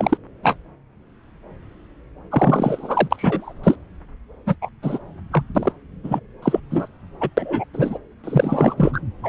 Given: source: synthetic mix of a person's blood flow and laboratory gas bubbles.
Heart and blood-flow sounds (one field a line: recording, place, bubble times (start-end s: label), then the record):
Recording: Doppler ultrasound of blood flow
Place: subclavian vein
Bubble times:
0.00-0.17 s: bubbles
0.42-0.55 s: bubbles
2.31-3.08 s: bubbles
3.10-3.53 s: bubbles
3.63-3.75 s: bubbles
4.46-4.55 s: bubbles
4.62-4.70 s: bubbles
4.82-4.98 s: bubbles
5.32-5.43 s: bubbles
5.55-5.72 s: bubbles
6.04-6.20 s: bubbles
6.42-6.60 s: bubbles
6.71-6.88 s: bubbles
7.21-7.29 s: bubbles
7.37-7.64 s: bubbles
7.73-7.98 s: bubbles
8.23-8.74 s: bubbles
8.78-8.99 s: bubbles
9.23-9.28 s: bubbles
From the record:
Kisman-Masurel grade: 233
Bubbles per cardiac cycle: several, 3 to 8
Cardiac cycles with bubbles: 50 to 99%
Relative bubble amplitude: loud (0.450 to 0.775)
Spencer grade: 3 (all of the cardiac periods contain showers or single bubble signals, but not dominating or overriding the cardiac motion signals)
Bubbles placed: anywhere in the cardiac cycle